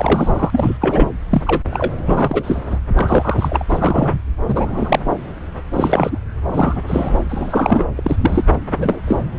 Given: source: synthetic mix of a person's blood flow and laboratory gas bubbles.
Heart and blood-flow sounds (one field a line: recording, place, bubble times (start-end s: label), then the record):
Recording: Doppler ultrasound of blood flow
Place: subclavian vein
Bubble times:
0.00-0.78 s: bubbles
0.81-1.09 s: bubbles
1.30-1.42 s: bubbles
1.46-1.61 s: bubbles
1.71-1.93 s: bubbles
2.05-2.77 s: bubbles
2.95-3.64 s: bubbles
3.69-4.20 s: bubbles
4.48-5.00 s: bubbles
5.73-6.18 s: bubbles
6.51-6.81 s: bubbles
6.87-7.18 s: bubbles
7.29-7.85 s: bubbles
7.95-8.45 s: bubbles
8.74-9.02 s: bubbles
9.06-9.16 s: bubbles
From the record:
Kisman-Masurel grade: 233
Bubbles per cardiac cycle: several, 3 to 8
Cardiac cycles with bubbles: 50 to 99%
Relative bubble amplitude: loud (0.450 to 0.775)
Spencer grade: 3 (all of the cardiac periods contain showers or single bubble signals, but not dominating or overriding the cardiac motion signals)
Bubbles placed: anywhere in the cardiac cycle